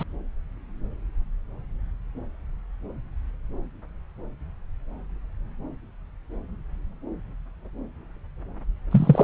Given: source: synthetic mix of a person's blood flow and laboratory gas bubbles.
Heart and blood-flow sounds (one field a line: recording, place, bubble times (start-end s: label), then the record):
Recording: Doppler ultrasound of blood flow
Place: subclavian vein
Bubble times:
0.00-0.03 s: bubbles
8.91-9.24 s: bubbles
From the record:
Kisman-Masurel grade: 223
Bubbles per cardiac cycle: several, 3 to 8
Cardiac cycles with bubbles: 10 to 50%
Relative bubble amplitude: loud (0.450 to 0.775)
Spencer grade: 2 (many but less than half of the cardiac periods contain bubble signals, singularly or in groups)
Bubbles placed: anywhere in the cardiac cycle